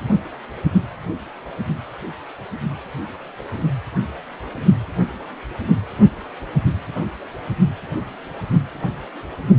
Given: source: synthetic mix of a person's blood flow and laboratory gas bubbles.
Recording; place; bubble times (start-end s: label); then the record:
Doppler ultrasound of blood flow; precordium
no bubbles
From the record:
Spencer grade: 0 (complete lack of bubble signals)